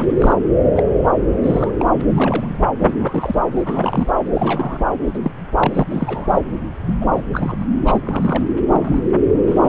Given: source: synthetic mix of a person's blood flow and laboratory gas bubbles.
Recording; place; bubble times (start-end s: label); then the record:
Doppler ultrasound of blood flow; subclavian vein
0.00-0.06 s: bubbles
0.17-0.33 s: bubbles
0.76-0.83 s: bubbles
1.44-1.71 s: bubbles
1.79-1.87 s: bubbles
1.94-2.02 s: bubbles
2.10-2.58 s: bubbles
2.79-2.95 s: bubbles
3.02-3.46 s: bubbles
3.56-4.12 s: bubbles
4.33-4.83 s: bubbles
5.13-5.19 s: bubbles
5.24-5.31 s: bubbles
5.57-5.83 s: bubbles
5.90-6.40 s: bubbles
6.87-6.95 s: bubbles
7.00-7.06 s: bubbles
7.12-7.24 s: bubbles
7.33-7.56 s: bubbles
7.58-7.65 s: bubbles
7.85-8.43 s: bubbles
8.71-9.04 s: bubbles
9.47-9.59 s: bubbles
9.61-9.69 s: bubbles
From the record:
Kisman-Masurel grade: 242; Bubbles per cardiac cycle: several, 3 to 8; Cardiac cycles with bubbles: 100%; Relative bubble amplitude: moderate (0.250 to 0.450); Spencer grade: 3 (all of the cardiac periods contain showers or single bubble signals, but not dominating or overriding the cardiac motion signals); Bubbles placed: anywhere in the cardiac cycle